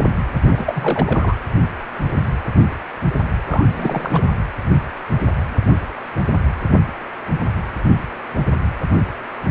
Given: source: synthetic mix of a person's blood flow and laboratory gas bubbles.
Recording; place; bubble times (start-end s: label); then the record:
Doppler ultrasound of blood flow; precordium
0.47-1.35 s: bubbles
3.41-4.22 s: bubbles
From the record:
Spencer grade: 2 (many but less than half of the cardiac periods contain bubble signals, singularly or in groups); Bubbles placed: anywhere in the cardiac cycle